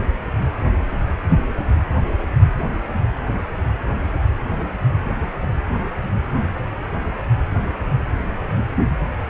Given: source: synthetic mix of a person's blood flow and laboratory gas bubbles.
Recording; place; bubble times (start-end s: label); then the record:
Doppler ultrasound of blood flow; precordium
no bubbles
From the record:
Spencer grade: 0 (complete lack of bubble signals)